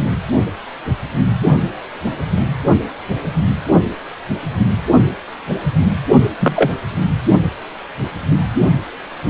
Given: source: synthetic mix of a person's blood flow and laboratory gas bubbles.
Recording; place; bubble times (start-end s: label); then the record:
Doppler ultrasound of blood flow; precordium
6.39-6.71 s: bubbles
From the record:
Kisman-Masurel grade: 113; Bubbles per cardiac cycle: 1 to 2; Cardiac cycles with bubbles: 1 to 10%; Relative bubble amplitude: loud (0.450 to 0.775); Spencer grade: 1 (occasional bubble signal discernible with the cardiac motion signal, with majority of cardiac periods free of bubbles); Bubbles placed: anywhere in the cardiac cycle